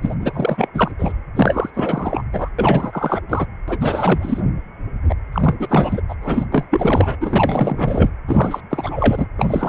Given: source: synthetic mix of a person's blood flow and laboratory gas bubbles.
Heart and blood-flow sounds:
Doppler ultrasound of blood flow; precordium
0.01-0.14 s: bubbles
0.20-0.68 s: bubbles
0.73-0.91 s: bubbles
0.98-1.12 s: bubbles
1.35-1.71 s: bubbles
1.73-2.24 s: bubbles
2.32-2.49 s: bubbles
2.58-3.21 s: bubbles
3.29-3.46 s: bubbles
3.67-3.78 s: bubbles
3.80-4.46 s: bubbles
5.08-5.15 s: bubbles
5.32-5.57 s: bubbles
5.60-6.00 s: bubbles
6.08-6.15 s: bubbles
6.22-6.46 s: bubbles
6.52-6.67 s: bubbles
6.70-7.17 s: bubbles
7.20-8.10 s: bubbles
8.27-8.60 s: bubbles
8.70-9.27 s: bubbles
9.38-9.69 s: bubbles
From the record:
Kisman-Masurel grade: 444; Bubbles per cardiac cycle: continuous sound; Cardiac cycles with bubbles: 100%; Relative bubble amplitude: maximal (0.775 to 0.999); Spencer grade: 4 (maximum detectable bubble signal sounding continuously throughout systole and diastole of every cardiac period, and overriding the amplitude of the normal cardiac signals); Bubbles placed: anywhere in the cardiac cycle

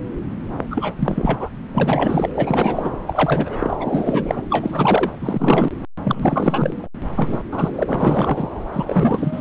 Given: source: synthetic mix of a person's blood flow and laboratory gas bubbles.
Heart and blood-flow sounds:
Doppler ultrasound of blood flow; subclavian vein
0.71-1.50 s: bubbles
1.72-2.29 s: bubbles
2.34-2.91 s: bubbles
3.07-3.76 s: bubbles
3.80-4.43 s: bubbles
4.50-5.12 s: bubbles
5.21-5.71 s: bubbles
6.04-6.88 s: bubbles
7.16-7.40 s: bubbles
7.52-7.83 s: bubbles
7.87-8.49 s: bubbles
8.73-9.41 s: bubbles
From the record:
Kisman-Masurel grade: 333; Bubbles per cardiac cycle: rolling drumbeat, 9 or more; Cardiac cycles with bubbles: 50 to 99%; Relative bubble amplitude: loud (0.450 to 0.775); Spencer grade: 3 (all of the cardiac periods contain showers or single bubble signals, but not dominating or overriding the cardiac motion signals); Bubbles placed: anywhere in the cardiac cycle

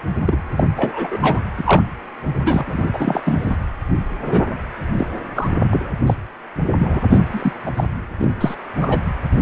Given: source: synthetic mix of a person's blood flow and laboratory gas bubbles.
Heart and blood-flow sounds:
Doppler ultrasound of blood flow; precordium
0.26-0.36 s: bubbles
0.56-0.64 s: bubbles
0.76-1.44 s: bubbles
1.58-1.83 s: bubbles
2.27-2.64 s: bubbles
2.67-2.84 s: bubbles
2.93-3.21 s: bubbles
3.25-3.57 s: bubbles
4.25-4.45 s: bubbles
4.93-5.07 s: bubbles
5.35-5.50 s: bubbles
5.70-5.92 s: bubbles
6.05-6.16 s: bubbles
6.78-7.00 s: bubbles
7.11-7.20 s: bubbles
7.30-7.53 s: bubbles
7.66-7.71 s: bubbles
7.76-7.84 s: bubbles
8.19-8.35 s: bubbles
8.40-8.55 s: bubbles
8.80-8.99 s: bubbles
9.32-9.42 s: bubbles
From the record:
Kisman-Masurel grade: 243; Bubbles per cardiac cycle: several, 3 to 8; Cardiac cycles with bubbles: 100%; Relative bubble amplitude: loud (0.450 to 0.775); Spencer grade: 3 (all of the cardiac periods contain showers or single bubble signals, but not dominating or overriding the cardiac motion signals); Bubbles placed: anywhere in the cardiac cycle

